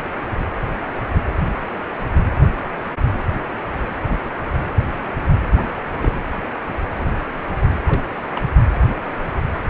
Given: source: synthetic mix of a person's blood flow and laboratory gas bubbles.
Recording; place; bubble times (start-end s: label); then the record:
Doppler ultrasound of blood flow; precordium
4.09-4.17 s: bubbles
5.55-5.66 s: bubbles
6.02-6.22 s: bubbles
7.88-8.04 s: bubbles
8.35-8.43 s: bubbles
From the record:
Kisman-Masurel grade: 121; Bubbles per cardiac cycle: 1 to 2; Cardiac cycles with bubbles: 10 to 50%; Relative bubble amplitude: barely perceptible (0.100 to 0.250); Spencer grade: 2 (many but less than half of the cardiac periods contain bubble signals, singularly or in groups); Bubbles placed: anywhere in the cardiac cycle